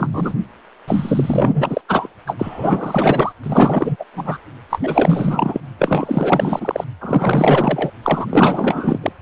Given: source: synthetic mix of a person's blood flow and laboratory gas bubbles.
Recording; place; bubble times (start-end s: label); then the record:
Doppler ultrasound of blood flow; precordium
0.00-0.34 s: bubbles
0.87-1.81 s: bubbles
1.88-2.07 s: bubbles
2.26-2.35 s: bubbles
2.38-3.32 s: bubbles
3.43-3.96 s: bubbles
3.99-4.04 s: bubbles
4.13-4.37 s: bubbles
4.70-4.80 s: bubbles
4.83-5.60 s: bubbles
5.79-6.84 s: bubbles
7.00-7.92 s: bubbles
8.03-8.27 s: bubbles
8.29-8.99 s: bubbles
9.02-9.12 s: bubbles
From the record:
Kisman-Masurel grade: 444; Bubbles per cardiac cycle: continuous sound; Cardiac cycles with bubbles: 100%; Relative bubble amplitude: maximal (0.775 to 0.999); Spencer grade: 4 (maximum detectable bubble signal sounding continuously throughout systole and diastole of every cardiac period, and overriding the amplitude of the normal cardiac signals); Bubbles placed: anywhere in the cardiac cycle